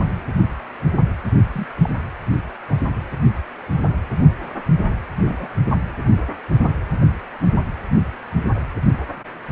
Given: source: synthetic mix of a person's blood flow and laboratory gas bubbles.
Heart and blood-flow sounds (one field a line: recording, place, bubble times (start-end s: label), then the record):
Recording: Doppler ultrasound of blood flow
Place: precordium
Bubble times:
1.53-1.67 s: bubbles
1.82-1.89 s: bubbles
2.67-2.75 s: bubbles
5.26-5.47 s: bubbles
From the record:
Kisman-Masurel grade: 121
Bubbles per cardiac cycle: 1 to 2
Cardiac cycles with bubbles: 10 to 50%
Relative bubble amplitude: barely perceptible (0.100 to 0.250)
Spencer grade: 2 (many but less than half of the cardiac periods contain bubble signals, singularly or in groups)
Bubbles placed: anywhere in the cardiac cycle